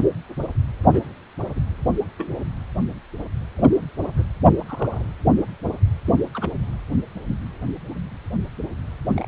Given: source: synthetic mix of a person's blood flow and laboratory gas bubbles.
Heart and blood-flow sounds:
Doppler ultrasound of blood flow; precordium
0.92-1.01 s: bubbles
1.50-1.61 s: bubbles
2.17-2.38 s: bubbles
3.56-3.72 s: bubbles
4.17-4.25 s: bubbles
4.59-5.06 s: bubbles
6.05-6.13 s: bubbles
6.33-6.49 s: bubbles
9.13-9.28 s: bubbles
From the record:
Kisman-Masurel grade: 121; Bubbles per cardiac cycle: 1 to 2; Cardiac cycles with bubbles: 10 to 50%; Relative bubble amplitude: barely perceptible (0.100 to 0.250); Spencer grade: 2 (many but less than half of the cardiac periods contain bubble signals, singularly or in groups); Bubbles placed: anywhere in the cardiac cycle

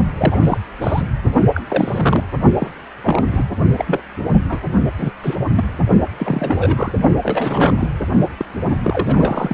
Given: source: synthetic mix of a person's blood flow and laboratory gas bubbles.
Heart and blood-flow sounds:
Doppler ultrasound of blood flow; precordium
0.18-0.57 s: bubbles
0.81-1.02 s: bubbles
1.54-1.62 s: bubbles
1.70-2.24 s: bubbles
2.52-2.71 s: bubbles
3.02-3.44 s: bubbles
3.77-4.01 s: bubbles
4.49-4.62 s: bubbles
4.98-5.11 s: bubbles
5.22-5.36 s: bubbles
5.54-5.64 s: bubbles
6.19-6.94 s: bubbles
7.23-7.89 s: bubbles
8.37-8.46 s: bubbles
8.83-9.54 s: bubbles
From the record:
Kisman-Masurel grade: 242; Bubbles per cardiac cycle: several, 3 to 8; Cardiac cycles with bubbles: 100%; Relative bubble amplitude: moderate (0.250 to 0.450); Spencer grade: 3 (all of the cardiac periods contain showers or single bubble signals, but not dominating or overriding the cardiac motion signals); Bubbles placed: only in the low amplitude regions of the cardiac cycle

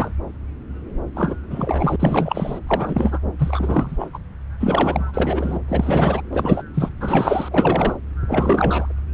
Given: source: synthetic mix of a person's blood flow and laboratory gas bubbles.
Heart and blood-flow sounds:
Doppler ultrasound of blood flow; subclavian vein
0.00-0.11 s: bubbles
1.16-1.35 s: bubbles
1.49-1.96 s: bubbles
2.00-2.59 s: bubbles
2.67-3.19 s: bubbles
3.38-4.08 s: bubbles
4.13-4.18 s: bubbles
4.59-5.11 s: bubbles
5.13-5.59 s: bubbles
5.68-6.21 s: bubbles
6.33-6.62 s: bubbles
6.74-6.90 s: bubbles
7.00-7.97 s: bubbles
8.26-8.93 s: bubbles
From the record:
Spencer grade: 3 (all of the cardiac periods contain showers or single bubble signals, but not dominating or overriding the cardiac motion signals); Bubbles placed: anywhere in the cardiac cycle

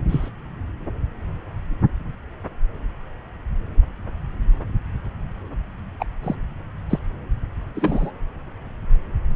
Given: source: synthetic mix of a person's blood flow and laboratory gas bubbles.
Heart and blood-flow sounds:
Doppler ultrasound of blood flow; subclavian vein
0.08-0.29 s: bubbles
5.99-6.05 s: bubbles
6.23-6.36 s: bubbles
6.89-6.99 s: bubbles
7.75-8.11 s: bubbles
From the record:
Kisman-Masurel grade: 122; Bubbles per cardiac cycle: 1 to 2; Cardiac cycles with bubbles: 10 to 50%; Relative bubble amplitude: moderate (0.250 to 0.450); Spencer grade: 2 (many but less than half of the cardiac periods contain bubble signals, singularly or in groups); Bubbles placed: anywhere in the cardiac cycle

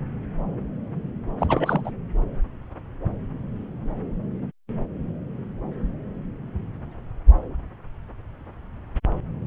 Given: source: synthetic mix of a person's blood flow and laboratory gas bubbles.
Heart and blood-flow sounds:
Doppler ultrasound of blood flow; subclavian vein
1.40-1.81 s: bubbles
1.84-1.91 s: bubbles
From the record:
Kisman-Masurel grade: 222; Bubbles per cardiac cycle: several, 3 to 8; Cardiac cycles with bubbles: 10 to 50%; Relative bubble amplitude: moderate (0.250 to 0.450); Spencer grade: 2 (many but less than half of the cardiac periods contain bubble signals, singularly or in groups); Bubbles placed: anywhere in the cardiac cycle

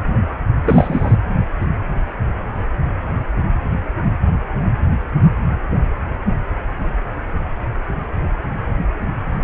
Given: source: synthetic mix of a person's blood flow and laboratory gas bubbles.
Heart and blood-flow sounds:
Doppler ultrasound of blood flow; precordium
0.64-1.17 s: bubbles
From the record:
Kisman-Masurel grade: 213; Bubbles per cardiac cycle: several, 3 to 8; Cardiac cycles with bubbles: 1 to 10%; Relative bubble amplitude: loud (0.450 to 0.775); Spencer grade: 1 (occasional bubble signal discernible with the cardiac motion signal, with majority of cardiac periods free of bubbles); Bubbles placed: anywhere in the cardiac cycle

